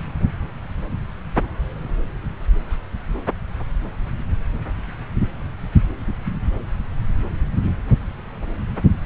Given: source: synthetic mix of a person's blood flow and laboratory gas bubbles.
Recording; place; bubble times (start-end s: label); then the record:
Doppler ultrasound of blood flow; subclavian vein
no bubbles
From the record:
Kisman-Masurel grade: 000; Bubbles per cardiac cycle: 0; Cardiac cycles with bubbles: 0%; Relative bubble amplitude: no bubbles discernible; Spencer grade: 0 (complete lack of bubble signals)